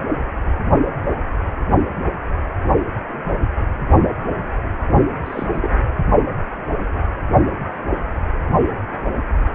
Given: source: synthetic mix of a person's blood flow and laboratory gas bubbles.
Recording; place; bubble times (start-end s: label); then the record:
Doppler ultrasound of blood flow; precordium
5.24-5.46 s: bubbles
5.53-5.70 s: bubbles
From the record:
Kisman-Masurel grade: 212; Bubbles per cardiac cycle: several, 3 to 8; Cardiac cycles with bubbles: 1 to 10%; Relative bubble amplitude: moderate (0.250 to 0.450); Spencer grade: 1 (occasional bubble signal discernible with the cardiac motion signal, with majority of cardiac periods free of bubbles); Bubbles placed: only in the low amplitude regions of the cardiac cycle